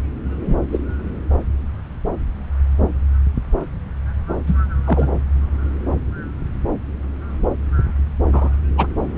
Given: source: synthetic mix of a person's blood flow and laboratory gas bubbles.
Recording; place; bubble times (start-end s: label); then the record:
Doppler ultrasound of blood flow; subclavian vein
0.47-0.56 s: bubbles
0.72-0.79 s: bubbles
4.47-4.58 s: bubbles
4.84-5.21 s: bubbles
8.32-8.53 s: bubbles
8.77-8.87 s: bubbles
From the record:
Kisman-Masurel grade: 123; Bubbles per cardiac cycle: 1 to 2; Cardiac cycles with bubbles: 10 to 50%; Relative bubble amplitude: loud (0.450 to 0.775); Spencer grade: 2 (many but less than half of the cardiac periods contain bubble signals, singularly or in groups); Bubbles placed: anywhere in the cardiac cycle